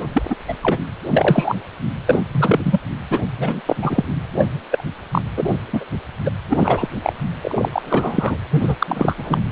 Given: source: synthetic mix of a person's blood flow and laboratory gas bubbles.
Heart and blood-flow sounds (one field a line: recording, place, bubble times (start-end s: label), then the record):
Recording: Doppler ultrasound of blood flow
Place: precordium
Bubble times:
0.00-0.03 s: bubbles
0.14-0.22 s: bubbles
0.30-0.35 s: bubbles
0.48-0.54 s: bubbles
0.62-0.80 s: bubbles
1.07-1.55 s: bubbles
2.06-2.20 s: bubbles
2.31-2.80 s: bubbles
3.10-3.20 s: bubbles
3.38-3.62 s: bubbles
3.66-3.76 s: bubbles
3.82-4.04 s: bubbles
4.38-4.48 s: bubbles
4.70-4.84 s: bubbles
5.12-5.21 s: bubbles
5.37-5.58 s: bubbles
5.73-5.85 s: bubbles
6.25-6.30 s: bubbles
6.50-6.58 s: bubbles
6.60-6.89 s: bubbles
7.04-7.13 s: bubbles
7.41-7.69 s: bubbles
7.72-7.82 s: bubbles
7.85-8.37 s: bubbles
8.50-8.76 s: bubbles
8.78-9.14 s: bubbles
9.17-9.39 s: bubbles
From the record:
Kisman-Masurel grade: 243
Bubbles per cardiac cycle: several, 3 to 8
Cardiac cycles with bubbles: 100%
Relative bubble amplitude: loud (0.450 to 0.775)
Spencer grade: 3 (all of the cardiac periods contain showers or single bubble signals, but not dominating or overriding the cardiac motion signals)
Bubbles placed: anywhere in the cardiac cycle